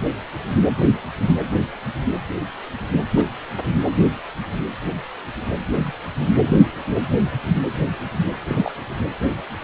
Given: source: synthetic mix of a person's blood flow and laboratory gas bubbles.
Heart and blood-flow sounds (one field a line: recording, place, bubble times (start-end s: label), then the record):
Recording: Doppler ultrasound of blood flow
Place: precordium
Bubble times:
3.16-3.26 s: bubbles
5.69-5.92 s: bubbles
8.47-8.71 s: bubbles
From the record:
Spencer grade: 2 (many but less than half of the cardiac periods contain bubble signals, singularly or in groups)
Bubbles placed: anywhere in the cardiac cycle